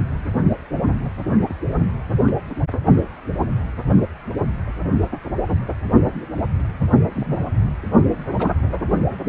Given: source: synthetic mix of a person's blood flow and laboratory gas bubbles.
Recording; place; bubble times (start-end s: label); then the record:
Doppler ultrasound of blood flow; precordium
1.49-1.54 s: bubbles
2.27-2.31 s: bubbles
2.50-2.54 s: bubbles
7.15-7.39 s: bubbles
8.38-8.50 s: bubbles
From the record:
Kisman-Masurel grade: 121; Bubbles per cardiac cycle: 1 to 2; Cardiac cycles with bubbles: 10 to 50%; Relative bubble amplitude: barely perceptible (0.100 to 0.250); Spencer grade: 2 (many but less than half of the cardiac periods contain bubble signals, singularly or in groups); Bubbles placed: only in the low amplitude regions of the cardiac cycle